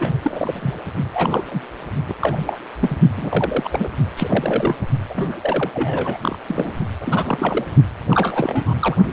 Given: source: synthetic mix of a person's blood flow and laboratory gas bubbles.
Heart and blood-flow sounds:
Doppler ultrasound of blood flow; precordium
0.00-0.75 s: bubbles
1.14-1.44 s: bubbles
1.50-1.62 s: bubbles
2.08-2.14 s: bubbles
2.20-2.56 s: bubbles
2.81-2.96 s: bubbles
3.17-3.90 s: bubbles
4.17-4.76 s: bubbles
5.09-5.71 s: bubbles
5.74-6.19 s: bubbles
6.21-6.38 s: bubbles
6.48-6.71 s: bubbles
7.00-7.65 s: bubbles
8.10-8.73 s: bubbles
8.79-8.97 s: bubbles
9.05-9.13 s: bubbles
From the record:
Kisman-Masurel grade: 342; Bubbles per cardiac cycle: rolling drumbeat, 9 or more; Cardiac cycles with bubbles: 100%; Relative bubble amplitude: moderate (0.250 to 0.450); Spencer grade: 3 (all of the cardiac periods contain showers or single bubble signals, but not dominating or overriding the cardiac motion signals); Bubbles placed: only in the low amplitude regions of the cardiac cycle

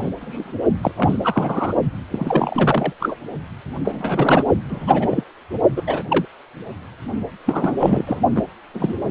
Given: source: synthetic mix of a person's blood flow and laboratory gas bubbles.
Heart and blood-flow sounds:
Doppler ultrasound of blood flow; precordium
0.00-0.10 s: bubbles
0.21-0.52 s: bubbles
0.82-0.92 s: bubbles
0.97-1.18 s: bubbles
1.23-1.75 s: bubbles
2.11-2.94 s: bubbles
3.00-3.16 s: bubbles
3.84-4.44 s: bubbles
4.68-5.24 s: bubbles
5.76-5.82 s: bubbles
5.87-6.03 s: bubbles
6.08-6.25 s: bubbles
7.46-7.74 s: bubbles
7.80-8.19 s: bubbles
8.35-8.43 s: bubbles
8.73-8.93 s: bubbles
From the record:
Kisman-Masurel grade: 243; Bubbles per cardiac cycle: several, 3 to 8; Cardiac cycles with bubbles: 100%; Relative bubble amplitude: loud (0.450 to 0.775); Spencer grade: 3 (all of the cardiac periods contain showers or single bubble signals, but not dominating or overriding the cardiac motion signals); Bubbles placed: only in the low amplitude regions of the cardiac cycle

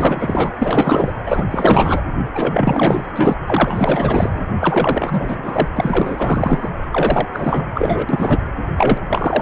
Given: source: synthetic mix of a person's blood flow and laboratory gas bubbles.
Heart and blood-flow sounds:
Doppler ultrasound of blood flow; precordium
0.00-0.53 s: bubbles
0.59-1.13 s: bubbles
1.26-1.45 s: bubbles
1.50-2.01 s: bubbles
2.31-3.08 s: bubbles
3.15-3.35 s: bubbles
3.46-4.46 s: bubbles
4.59-5.68 s: bubbles
5.76-6.70 s: bubbles
6.92-7.26 s: bubbles
7.33-7.67 s: bubbles
7.74-8.06 s: bubbles
8.09-8.38 s: bubbles
8.77-9.02 s: bubbles
9.09-9.42 s: bubbles
From the record:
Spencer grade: 4 (maximum detectable bubble signal sounding continuously throughout systole and diastole of every cardiac period, and overriding the amplitude of the normal cardiac signals); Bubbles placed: anywhere in the cardiac cycle

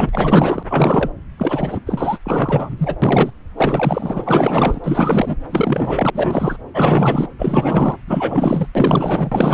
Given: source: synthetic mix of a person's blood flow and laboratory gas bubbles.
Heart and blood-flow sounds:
Doppler ultrasound of blood flow; subclavian vein
0.00-0.09 s: bubbles
0.12-0.63 s: bubbles
0.69-1.11 s: bubbles
1.38-1.81 s: bubbles
1.85-2.19 s: bubbles
2.24-2.96 s: bubbles
3.02-3.31 s: bubbles
3.56-4.80 s: bubbles
4.83-5.36 s: bubbles
5.49-6.57 s: bubbles
6.74-7.28 s: bubbles
7.38-7.97 s: bubbles
8.07-8.69 s: bubbles
8.75-9.54 s: bubbles
From the record:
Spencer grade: 4 (maximum detectable bubble signal sounding continuously throughout systole and diastole of every cardiac period, and overriding the amplitude of the normal cardiac signals); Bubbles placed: anywhere in the cardiac cycle

